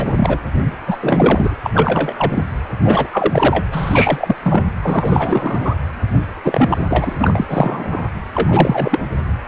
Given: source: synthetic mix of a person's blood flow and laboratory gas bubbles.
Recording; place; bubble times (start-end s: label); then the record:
Doppler ultrasound of blood flow; precordium
0.00-0.38 s: bubbles
0.62-0.71 s: bubbles
0.87-0.97 s: bubbles
1.01-1.55 s: bubbles
1.63-1.71 s: bubbles
1.73-2.44 s: bubbles
2.84-3.07 s: bubbles
3.12-3.66 s: bubbles
3.72-4.36 s: bubbles
4.44-4.71 s: bubbles
4.83-5.75 s: bubbles
6.44-7.16 s: bubbles
7.20-8.09 s: bubbles
8.34-9.00 s: bubbles
From the record:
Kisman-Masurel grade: 333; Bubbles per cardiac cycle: rolling drumbeat, 9 or more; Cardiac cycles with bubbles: 50 to 99%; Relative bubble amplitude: loud (0.450 to 0.775); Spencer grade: 3 (all of the cardiac periods contain showers or single bubble signals, but not dominating or overriding the cardiac motion signals); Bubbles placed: anywhere in the cardiac cycle